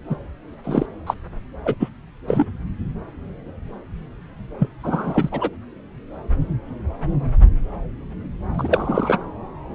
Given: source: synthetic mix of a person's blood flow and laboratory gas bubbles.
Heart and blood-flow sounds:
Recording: Doppler ultrasound of blood flow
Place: subclavian vein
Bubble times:
0.09-0.15 s: bubbles
0.64-0.86 s: bubbles
1.06-1.14 s: bubbles
1.65-1.74 s: bubbles
1.79-1.89 s: bubbles
2.28-2.45 s: bubbles
4.59-4.69 s: bubbles
4.83-5.50 s: bubbles
8.54-9.18 s: bubbles
From the record:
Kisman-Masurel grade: 223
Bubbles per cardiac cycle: several, 3 to 8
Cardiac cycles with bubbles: 10 to 50%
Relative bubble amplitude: loud (0.450 to 0.775)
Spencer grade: 2 (many but less than half of the cardiac periods contain bubble signals, singularly or in groups)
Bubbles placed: anywhere in the cardiac cycle

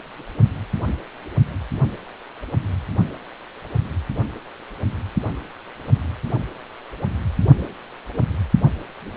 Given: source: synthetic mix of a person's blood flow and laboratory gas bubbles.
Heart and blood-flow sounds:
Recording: Doppler ultrasound of blood flow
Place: precordium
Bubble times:
no bubbles
From the record:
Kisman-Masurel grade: 000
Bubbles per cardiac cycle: 0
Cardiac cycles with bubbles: 0%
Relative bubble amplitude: no bubbles discernible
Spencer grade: 0 (complete lack of bubble signals)

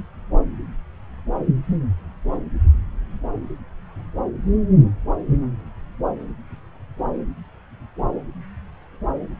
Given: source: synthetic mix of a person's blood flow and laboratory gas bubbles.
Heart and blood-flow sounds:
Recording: Doppler ultrasound of blood flow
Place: subclavian vein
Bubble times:
no bubbles
From the record:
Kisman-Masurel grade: 000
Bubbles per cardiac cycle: 0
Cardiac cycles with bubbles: 0%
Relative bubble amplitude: no bubbles discernible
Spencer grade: 0 (complete lack of bubble signals)

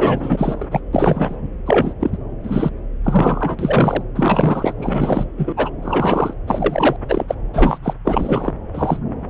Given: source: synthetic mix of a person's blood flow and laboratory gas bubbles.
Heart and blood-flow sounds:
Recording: Doppler ultrasound of blood flow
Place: subclavian vein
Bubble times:
0.00-0.67 s: bubbles
0.71-0.80 s: bubbles
0.93-1.36 s: bubbles
1.66-1.94 s: bubbles
2.00-2.18 s: bubbles
2.44-2.70 s: bubbles
3.04-4.03 s: bubbles
4.16-4.74 s: bubbles
4.77-5.26 s: bubbles
5.37-5.70 s: bubbles
5.82-6.33 s: bubbles
6.47-6.96 s: bubbles
7.08-7.35 s: bubbles
7.53-7.78 s: bubbles
7.83-7.93 s: bubbles
8.04-8.53 s: bubbles
8.74-9.00 s: bubbles
From the record:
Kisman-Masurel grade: 243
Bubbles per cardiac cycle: several, 3 to 8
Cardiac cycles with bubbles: 100%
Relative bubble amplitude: loud (0.450 to 0.775)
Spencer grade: 3 (all of the cardiac periods contain showers or single bubble signals, but not dominating or overriding the cardiac motion signals)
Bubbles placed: anywhere in the cardiac cycle

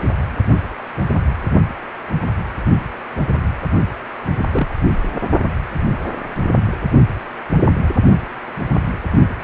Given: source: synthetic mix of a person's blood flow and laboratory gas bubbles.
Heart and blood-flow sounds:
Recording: Doppler ultrasound of blood flow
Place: precordium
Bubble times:
4.36-4.76 s: bubbles
From the record:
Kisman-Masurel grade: 112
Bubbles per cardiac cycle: 1 to 2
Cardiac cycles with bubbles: 1 to 10%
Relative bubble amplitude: moderate (0.250 to 0.450)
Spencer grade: 1 (occasional bubble signal discernible with the cardiac motion signal, with majority of cardiac periods free of bubbles)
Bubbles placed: only in the low amplitude regions of the cardiac cycle

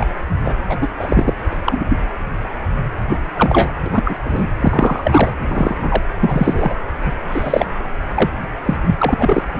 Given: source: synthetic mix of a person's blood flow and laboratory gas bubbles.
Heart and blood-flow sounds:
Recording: Doppler ultrasound of blood flow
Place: precordium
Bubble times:
0.00-0.05 s: bubbles
0.44-0.54 s: bubbles
0.68-0.78 s: bubbles
0.81-0.87 s: bubbles
0.99-1.34 s: bubbles
1.65-1.85 s: bubbles
1.89-1.97 s: bubbles
3.08-3.18 s: bubbles
3.37-3.72 s: bubbles
3.84-4.15 s: bubbles
4.25-4.46 s: bubbles
4.60-5.32 s: bubbles
5.48-5.75 s: bubbles
5.78-6.02 s: bubbles
6.20-6.74 s: bubbles
7.04-7.12 s: bubbles
7.32-7.66 s: bubbles
8.14-8.29 s: bubbles
8.65-8.76 s: bubbles
8.86-8.96 s: bubbles
8.98-9.42 s: bubbles
From the record:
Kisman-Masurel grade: 233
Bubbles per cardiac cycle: several, 3 to 8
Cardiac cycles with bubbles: 50 to 99%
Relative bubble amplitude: loud (0.450 to 0.775)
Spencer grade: 3 (all of the cardiac periods contain showers or single bubble signals, but not dominating or overriding the cardiac motion signals)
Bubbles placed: anywhere in the cardiac cycle

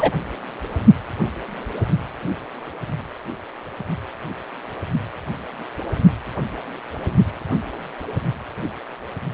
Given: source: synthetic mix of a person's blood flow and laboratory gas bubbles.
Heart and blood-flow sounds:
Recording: Doppler ultrasound of blood flow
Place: precordium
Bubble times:
0.00-0.12 s: bubbles
From the record:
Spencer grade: 1 (occasional bubble signal discernible with the cardiac motion signal, with majority of cardiac periods free of bubbles)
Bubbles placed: only in the low amplitude regions of the cardiac cycle

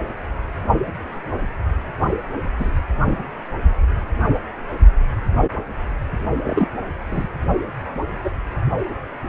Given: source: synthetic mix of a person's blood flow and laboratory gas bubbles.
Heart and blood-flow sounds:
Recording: Doppler ultrasound of blood flow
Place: precordium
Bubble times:
2.58-2.70 s: bubbles
3.05-3.27 s: bubbles
6.45-6.66 s: bubbles
7.10-7.29 s: bubbles
8.24-8.31 s: bubbles
From the record:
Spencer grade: 2 (many but less than half of the cardiac periods contain bubble signals, singularly or in groups)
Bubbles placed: only in the low amplitude regions of the cardiac cycle

